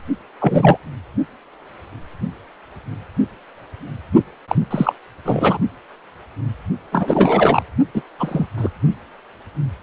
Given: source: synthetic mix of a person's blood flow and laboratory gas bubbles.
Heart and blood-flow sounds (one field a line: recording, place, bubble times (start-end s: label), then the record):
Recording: Doppler ultrasound of blood flow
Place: precordium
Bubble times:
0.40-0.78 s: bubbles
4.48-4.55 s: bubbles
4.71-4.93 s: bubbles
5.25-5.58 s: bubbles
6.92-7.62 s: bubbles
7.94-8.03 s: bubbles
8.19-8.46 s: bubbles
8.57-8.71 s: bubbles
From the record:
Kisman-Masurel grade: 233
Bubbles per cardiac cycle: several, 3 to 8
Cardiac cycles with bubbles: 50 to 99%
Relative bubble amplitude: loud (0.450 to 0.775)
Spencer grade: 3 (all of the cardiac periods contain showers or single bubble signals, but not dominating or overriding the cardiac motion signals)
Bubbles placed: only in the low amplitude regions of the cardiac cycle